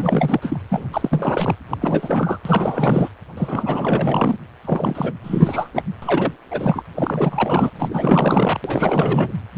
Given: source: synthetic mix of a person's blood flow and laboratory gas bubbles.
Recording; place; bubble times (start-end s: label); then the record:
Doppler ultrasound of blood flow; precordium
0.00-0.59 s: bubbles
0.68-0.88 s: bubbles
0.92-1.56 s: bubbles
1.70-1.77 s: bubbles
1.81-2.38 s: bubbles
2.45-3.09 s: bubbles
3.37-4.36 s: bubbles
4.65-5.12 s: bubbles
5.23-5.69 s: bubbles
5.73-5.83 s: bubbles
6.02-6.38 s: bubbles
6.51-6.84 s: bubbles
6.95-7.71 s: bubbles
7.79-8.60 s: bubbles
8.64-9.32 s: bubbles
9.54-9.58 s: bubbles
From the record:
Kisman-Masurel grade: 444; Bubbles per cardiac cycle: continuous sound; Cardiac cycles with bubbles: 100%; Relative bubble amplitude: maximal (0.775 to 0.999); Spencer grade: 4 (maximum detectable bubble signal sounding continuously throughout systole and diastole of every cardiac period, and overriding the amplitude of the normal cardiac signals); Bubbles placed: anywhere in the cardiac cycle